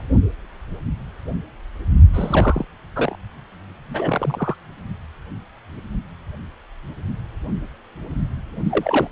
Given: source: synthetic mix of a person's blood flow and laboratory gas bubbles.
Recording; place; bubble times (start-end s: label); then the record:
Doppler ultrasound of blood flow; precordium
2.13-2.65 s: bubbles
2.96-3.15 s: bubbles
3.90-4.55 s: bubbles
8.70-9.07 s: bubbles
From the record:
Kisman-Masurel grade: 222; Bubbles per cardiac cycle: several, 3 to 8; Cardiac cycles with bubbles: 10 to 50%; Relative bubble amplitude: moderate (0.250 to 0.450); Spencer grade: 2 (many but less than half of the cardiac periods contain bubble signals, singularly or in groups); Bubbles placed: only in the low amplitude regions of the cardiac cycle